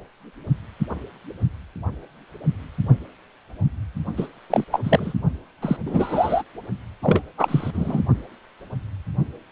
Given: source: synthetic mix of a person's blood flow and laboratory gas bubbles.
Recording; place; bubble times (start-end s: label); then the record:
Doppler ultrasound of blood flow; precordium
4.17-4.27 s: bubbles
4.50-4.64 s: bubbles
4.72-4.80 s: bubbles
4.84-5.13 s: bubbles
5.62-5.77 s: bubbles
5.86-6.42 s: bubbles
7.03-7.23 s: bubbles
7.38-7.71 s: bubbles
7.73-8.01 s: bubbles
From the record:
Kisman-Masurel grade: 223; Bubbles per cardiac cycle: several, 3 to 8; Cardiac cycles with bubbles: 10 to 50%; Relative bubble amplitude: loud (0.450 to 0.775); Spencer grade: 2 (many but less than half of the cardiac periods contain bubble signals, singularly or in groups); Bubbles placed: only in the low amplitude regions of the cardiac cycle